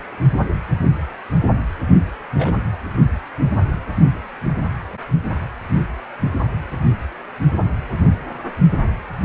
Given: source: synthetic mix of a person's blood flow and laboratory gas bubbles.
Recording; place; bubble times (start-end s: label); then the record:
Doppler ultrasound of blood flow; precordium
2.35-2.61 s: bubbles
From the record:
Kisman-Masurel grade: 113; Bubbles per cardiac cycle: 1 to 2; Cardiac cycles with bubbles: 1 to 10%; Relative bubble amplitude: loud (0.450 to 0.775); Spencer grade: 1 (occasional bubble signal discernible with the cardiac motion signal, with majority of cardiac periods free of bubbles); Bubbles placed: anywhere in the cardiac cycle